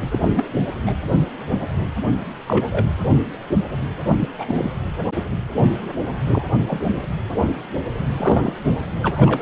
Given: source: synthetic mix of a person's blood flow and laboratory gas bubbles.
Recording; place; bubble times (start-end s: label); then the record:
Doppler ultrasound of blood flow; precordium
0.11-0.45 s: bubbles
0.86-0.94 s: bubbles
2.47-2.67 s: bubbles
2.72-2.84 s: bubbles
4.19-4.29 s: bubbles
4.38-4.71 s: bubbles
6.33-6.44 s: bubbles
6.67-6.81 s: bubbles
8.12-8.53 s: bubbles
9.02-9.42 s: bubbles
From the record:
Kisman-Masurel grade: 232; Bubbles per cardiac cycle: several, 3 to 8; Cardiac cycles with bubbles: 50 to 99%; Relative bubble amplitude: moderate (0.250 to 0.450); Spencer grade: 3 (all of the cardiac periods contain showers or single bubble signals, but not dominating or overriding the cardiac motion signals); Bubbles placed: anywhere in the cardiac cycle